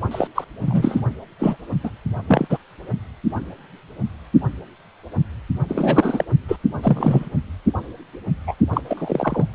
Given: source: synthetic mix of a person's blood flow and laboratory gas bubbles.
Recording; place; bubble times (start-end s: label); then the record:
Doppler ultrasound of blood flow; precordium
0.11-0.28 s: bubbles
0.35-0.45 s: bubbles
0.61-1.01 s: bubbles
1.39-1.57 s: bubbles
1.84-1.90 s: bubbles
2.28-2.58 s: bubbles
5.68-6.25 s: bubbles
6.48-6.56 s: bubbles
6.83-7.29 s: bubbles
8.46-8.54 s: bubbles
8.73-8.81 s: bubbles
8.87-9.46 s: bubbles
From the record:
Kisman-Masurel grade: 233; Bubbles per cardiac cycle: several, 3 to 8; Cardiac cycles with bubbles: 50 to 99%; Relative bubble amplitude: loud (0.450 to 0.775); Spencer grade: 3 (all of the cardiac periods contain showers or single bubble signals, but not dominating or overriding the cardiac motion signals); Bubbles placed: only in the low amplitude regions of the cardiac cycle